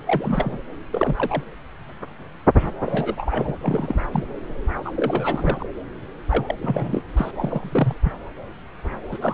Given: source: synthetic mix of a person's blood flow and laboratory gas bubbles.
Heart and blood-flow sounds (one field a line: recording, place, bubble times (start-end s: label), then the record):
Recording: Doppler ultrasound of blood flow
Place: subclavian vein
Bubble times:
0.07-0.61 s: bubbles
0.93-1.44 s: bubbles
2.85-3.54 s: bubbles
3.62-4.01 s: bubbles
4.12-4.24 s: bubbles
4.85-4.92 s: bubbles
4.96-5.69 s: bubbles
6.28-6.55 s: bubbles
6.62-7.01 s: bubbles
7.17-7.31 s: bubbles
7.36-7.97 s: bubbles
8.04-8.13 s: bubbles
9.11-9.18 s: bubbles
9.21-9.34 s: bubbles
From the record:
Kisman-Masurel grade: 232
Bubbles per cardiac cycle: several, 3 to 8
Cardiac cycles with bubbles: 50 to 99%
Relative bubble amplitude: moderate (0.250 to 0.450)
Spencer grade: 3 (all of the cardiac periods contain showers or single bubble signals, but not dominating or overriding the cardiac motion signals)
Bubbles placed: anywhere in the cardiac cycle